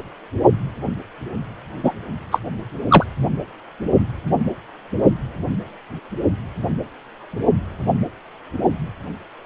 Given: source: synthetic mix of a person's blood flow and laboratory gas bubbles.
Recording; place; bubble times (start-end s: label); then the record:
Doppler ultrasound of blood flow; precordium
1.83-1.92 s: bubbles
2.31-2.40 s: bubbles
2.88-3.04 s: bubbles
From the record:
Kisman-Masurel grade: 213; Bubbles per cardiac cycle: several, 3 to 8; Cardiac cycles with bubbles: 1 to 10%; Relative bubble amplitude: loud (0.450 to 0.775); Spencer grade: 1 (occasional bubble signal discernible with the cardiac motion signal, with majority of cardiac periods free of bubbles); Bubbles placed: only in the low amplitude regions of the cardiac cycle